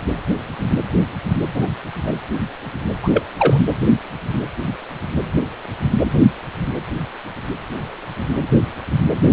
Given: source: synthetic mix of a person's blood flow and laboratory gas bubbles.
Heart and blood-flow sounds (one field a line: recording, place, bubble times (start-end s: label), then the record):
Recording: Doppler ultrasound of blood flow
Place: precordium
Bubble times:
1.54-1.72 s: bubbles
2.03-2.12 s: bubbles
3.02-3.10 s: bubbles
3.14-3.27 s: bubbles
3.37-3.62 s: bubbles
From the record:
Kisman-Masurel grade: 222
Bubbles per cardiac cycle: several, 3 to 8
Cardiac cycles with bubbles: 10 to 50%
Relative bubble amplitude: moderate (0.250 to 0.450)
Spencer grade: 2 (many but less than half of the cardiac periods contain bubble signals, singularly or in groups)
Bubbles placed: anywhere in the cardiac cycle